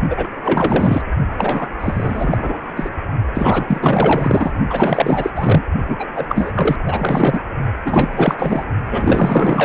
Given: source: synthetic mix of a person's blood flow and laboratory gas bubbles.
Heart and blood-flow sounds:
Doppler ultrasound of blood flow; precordium
0.09-0.27 s: bubbles
0.44-1.02 s: bubbles
1.38-1.67 s: bubbles
1.79-2.58 s: bubbles
2.76-2.90 s: bubbles
3.34-4.51 s: bubbles
4.70-5.30 s: bubbles
5.35-5.64 s: bubbles
5.88-6.08 s: bubbles
6.15-6.53 s: bubbles
6.55-6.76 s: bubbles
6.86-7.39 s: bubbles
7.85-8.35 s: bubbles
8.38-8.64 s: bubbles
8.90-9.65 s: bubbles
From the record:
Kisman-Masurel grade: 444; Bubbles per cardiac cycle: continuous sound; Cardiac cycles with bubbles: 100%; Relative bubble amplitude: maximal (0.775 to 0.999); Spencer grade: 4 (maximum detectable bubble signal sounding continuously throughout systole and diastole of every cardiac period, and overriding the amplitude of the normal cardiac signals); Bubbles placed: only in the low amplitude regions of the cardiac cycle

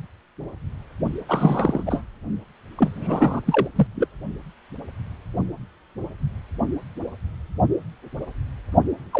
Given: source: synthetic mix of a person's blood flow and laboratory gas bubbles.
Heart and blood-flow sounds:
Doppler ultrasound of blood flow; precordium
1.29-1.84 s: bubbles
1.86-2.04 s: bubbles
2.78-3.40 s: bubbles
3.46-3.69 s: bubbles
3.75-3.87 s: bubbles
3.95-4.08 s: bubbles
9.12-9.20 s: bubbles
From the record:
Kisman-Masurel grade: 222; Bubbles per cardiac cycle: several, 3 to 8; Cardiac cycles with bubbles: 10 to 50%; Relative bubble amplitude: moderate (0.250 to 0.450); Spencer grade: 2 (many but less than half of the cardiac periods contain bubble signals, singularly or in groups); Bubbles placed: only in the low amplitude regions of the cardiac cycle

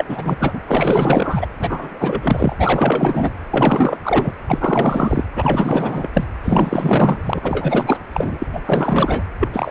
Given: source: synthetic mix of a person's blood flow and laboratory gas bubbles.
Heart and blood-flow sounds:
Doppler ultrasound of blood flow; precordium
0.00-0.05 s: bubbles
0.08-0.36 s: bubbles
0.39-0.61 s: bubbles
0.68-1.46 s: bubbles
1.58-2.55 s: bubbles
2.58-3.30 s: bubbles
3.50-3.97 s: bubbles
4.04-4.33 s: bubbles
4.47-5.24 s: bubbles
5.35-6.08 s: bubbles
6.13-6.24 s: bubbles
6.44-7.98 s: bubbles
8.12-8.38 s: bubbles
8.42-8.46 s: bubbles
8.53-8.61 s: bubbles
8.65-9.24 s: bubbles
9.39-9.49 s: bubbles
9.53-9.71 s: bubbles
From the record:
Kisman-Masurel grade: 444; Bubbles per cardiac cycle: continuous sound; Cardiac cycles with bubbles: 100%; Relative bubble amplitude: maximal (0.775 to 0.999); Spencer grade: 4 (maximum detectable bubble signal sounding continuously throughout systole and diastole of every cardiac period, and overriding the amplitude of the normal cardiac signals); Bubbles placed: anywhere in the cardiac cycle

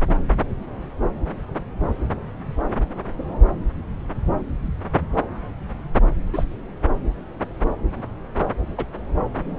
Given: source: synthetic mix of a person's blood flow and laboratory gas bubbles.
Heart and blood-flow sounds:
Doppler ultrasound of blood flow; subclavian vein
6.33-6.44 s: bubbles
8.77-8.85 s: bubbles
From the record:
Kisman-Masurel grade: 122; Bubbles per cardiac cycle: 1 to 2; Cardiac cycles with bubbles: 10 to 50%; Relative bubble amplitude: moderate (0.250 to 0.450); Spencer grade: 2 (many but less than half of the cardiac periods contain bubble signals, singularly or in groups); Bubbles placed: anywhere in the cardiac cycle

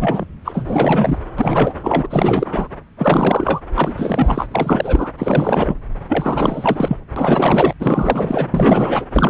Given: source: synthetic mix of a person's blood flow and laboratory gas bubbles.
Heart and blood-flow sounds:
Doppler ultrasound of blood flow; subclavian vein
0.00-0.26 s: bubbles
0.45-1.19 s: bubbles
1.38-1.76 s: bubbles
1.82-2.06 s: bubbles
2.09-2.68 s: bubbles
2.98-3.61 s: bubbles
3.74-3.94 s: bubbles
3.96-4.48 s: bubbles
4.51-5.10 s: bubbles
5.18-5.75 s: bubbles
6.08-6.98 s: bubbles
7.16-7.73 s: bubbles
7.79-8.47 s: bubbles
8.54-9.04 s: bubbles
9.13-9.29 s: bubbles
From the record:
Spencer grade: 4 (maximum detectable bubble signal sounding continuously throughout systole and diastole of every cardiac period, and overriding the amplitude of the normal cardiac signals); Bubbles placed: anywhere in the cardiac cycle

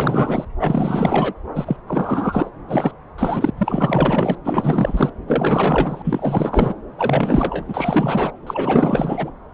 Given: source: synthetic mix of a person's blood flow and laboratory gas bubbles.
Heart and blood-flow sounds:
Doppler ultrasound of blood flow; subclavian vein
0.00-0.45 s: bubbles
0.59-1.33 s: bubbles
1.54-1.76 s: bubbles
1.87-2.50 s: bubbles
2.68-2.92 s: bubbles
3.18-3.51 s: bubbles
3.58-4.38 s: bubbles
4.44-5.10 s: bubbles
5.27-6.75 s: bubbles
6.98-7.65 s: bubbles
7.68-8.32 s: bubbles
8.46-9.30 s: bubbles
From the record:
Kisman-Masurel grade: 444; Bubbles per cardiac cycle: continuous sound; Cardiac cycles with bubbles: 100%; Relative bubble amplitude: maximal (0.775 to 0.999); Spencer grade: 4 (maximum detectable bubble signal sounding continuously throughout systole and diastole of every cardiac period, and overriding the amplitude of the normal cardiac signals); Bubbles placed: anywhere in the cardiac cycle

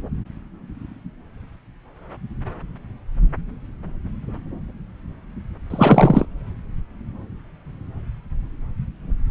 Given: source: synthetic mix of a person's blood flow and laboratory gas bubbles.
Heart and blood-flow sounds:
Doppler ultrasound of blood flow; subclavian vein
5.70-6.25 s: bubbles
From the record:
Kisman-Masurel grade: 213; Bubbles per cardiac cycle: several, 3 to 8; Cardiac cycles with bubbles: 1 to 10%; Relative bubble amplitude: loud (0.450 to 0.775); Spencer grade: 1 (occasional bubble signal discernible with the cardiac motion signal, with majority of cardiac periods free of bubbles); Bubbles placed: anywhere in the cardiac cycle

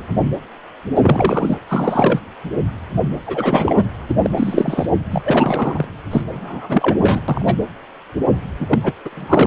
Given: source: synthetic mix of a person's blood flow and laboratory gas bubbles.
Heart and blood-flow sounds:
Doppler ultrasound of blood flow; precordium
0.95-1.57 s: bubbles
1.68-2.19 s: bubbles
3.26-3.83 s: bubbles
4.08-4.15 s: bubbles
4.23-4.86 s: bubbles
5.11-5.84 s: bubbles
6.11-6.21 s: bubbles
6.32-7.21 s: bubbles
7.28-7.54 s: bubbles
8.59-8.79 s: bubbles
8.83-8.93 s: bubbles
9.05-9.47 s: bubbles
From the record:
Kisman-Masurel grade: 333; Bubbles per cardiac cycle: rolling drumbeat, 9 or more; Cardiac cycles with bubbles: 50 to 99%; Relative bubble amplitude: loud (0.450 to 0.775); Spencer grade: 3 (all of the cardiac periods contain showers or single bubble signals, but not dominating or overriding the cardiac motion signals); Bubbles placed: anywhere in the cardiac cycle

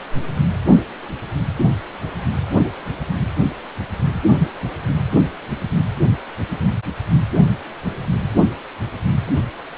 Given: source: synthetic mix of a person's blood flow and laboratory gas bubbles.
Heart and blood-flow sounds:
Doppler ultrasound of blood flow; precordium
no bubbles
From the record:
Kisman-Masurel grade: 000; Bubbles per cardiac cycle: 0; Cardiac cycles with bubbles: 0%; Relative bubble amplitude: no bubbles discernible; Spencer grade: 0 (complete lack of bubble signals)

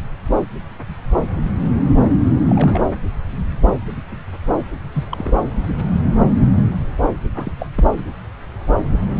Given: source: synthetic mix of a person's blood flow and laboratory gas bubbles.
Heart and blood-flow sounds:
Doppler ultrasound of blood flow; subclavian vein
2.46-2.88 s: bubbles
4.92-5.04 s: bubbles
5.10-5.31 s: bubbles
7.34-7.52 s: bubbles
7.59-7.68 s: bubbles
7.75-7.85 s: bubbles
From the record:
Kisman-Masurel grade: 221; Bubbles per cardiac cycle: several, 3 to 8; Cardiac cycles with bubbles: 10 to 50%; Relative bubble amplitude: barely perceptible (0.100 to 0.250); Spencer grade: 2 (many but less than half of the cardiac periods contain bubble signals, singularly or in groups); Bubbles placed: anywhere in the cardiac cycle

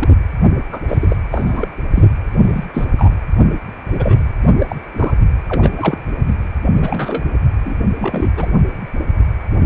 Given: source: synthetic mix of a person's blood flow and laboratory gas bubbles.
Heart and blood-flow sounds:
Doppler ultrasound of blood flow; precordium
0.00-0.09 s: bubbles
0.72-0.79 s: bubbles
0.88-0.97 s: bubbles
1.01-1.16 s: bubbles
1.30-1.68 s: bubbles
1.95-2.06 s: bubbles
2.42-2.65 s: bubbles
2.73-2.85 s: bubbles
2.96-3.11 s: bubbles
3.94-4.21 s: bubbles
4.58-4.76 s: bubbles
4.93-5.16 s: bubbles
5.49-5.98 s: bubbles
6.27-6.33 s: bubbles
6.75-7.23 s: bubbles
7.65-7.74 s: bubbles
7.99-8.32 s: bubbles
8.37-8.51 s: bubbles
9.63-9.66 s: bubbles
From the record:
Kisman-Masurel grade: 243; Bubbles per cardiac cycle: several, 3 to 8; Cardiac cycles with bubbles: 100%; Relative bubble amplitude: loud (0.450 to 0.775); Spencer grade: 3 (all of the cardiac periods contain showers or single bubble signals, but not dominating or overriding the cardiac motion signals); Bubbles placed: anywhere in the cardiac cycle

